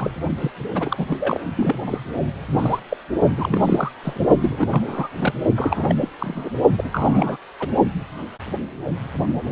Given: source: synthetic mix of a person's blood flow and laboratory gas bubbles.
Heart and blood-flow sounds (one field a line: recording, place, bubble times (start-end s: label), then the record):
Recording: Doppler ultrasound of blood flow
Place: precordium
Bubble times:
0.00-0.10 s: bubbles
0.38-0.51 s: bubbles
0.74-1.17 s: bubbles
1.20-1.41 s: bubbles
1.56-1.79 s: bubbles
1.86-1.98 s: bubbles
2.53-2.80 s: bubbles
2.89-2.97 s: bubbles
3.38-3.91 s: bubbles
4.04-4.27 s: bubbles
4.38-5.08 s: bubbles
5.18-5.33 s: bubbles
5.55-5.96 s: bubbles
6.01-6.08 s: bubbles
6.19-6.50 s: bubbles
6.77-7.37 s: bubbles
7.60-7.68 s: bubbles
From the record:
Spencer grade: 3 (all of the cardiac periods contain showers or single bubble signals, but not dominating or overriding the cardiac motion signals)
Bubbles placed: only in the low amplitude regions of the cardiac cycle